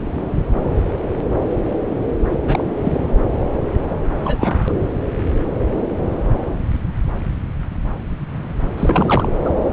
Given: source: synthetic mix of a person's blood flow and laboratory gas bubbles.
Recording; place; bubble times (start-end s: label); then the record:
Doppler ultrasound of blood flow; subclavian vein
2.47-2.64 s: bubbles
2.83-3.00 s: bubbles
4.24-4.73 s: bubbles
8.77-9.29 s: bubbles
9.45-9.49 s: bubbles
From the record:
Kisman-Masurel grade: 222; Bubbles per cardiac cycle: several, 3 to 8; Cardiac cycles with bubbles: 10 to 50%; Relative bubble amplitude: moderate (0.250 to 0.450); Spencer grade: 2 (many but less than half of the cardiac periods contain bubble signals, singularly or in groups); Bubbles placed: anywhere in the cardiac cycle